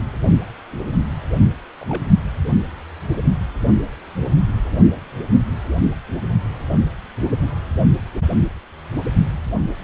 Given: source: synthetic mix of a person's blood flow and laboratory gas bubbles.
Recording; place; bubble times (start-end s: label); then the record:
Doppler ultrasound of blood flow; precordium
1.80-2.07 s: bubbles
From the record:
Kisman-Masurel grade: 111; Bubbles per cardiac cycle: 1 to 2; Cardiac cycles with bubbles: 1 to 10%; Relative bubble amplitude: barely perceptible (0.100 to 0.250); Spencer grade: 1 (occasional bubble signal discernible with the cardiac motion signal, with majority of cardiac periods free of bubbles); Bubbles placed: only in the low amplitude regions of the cardiac cycle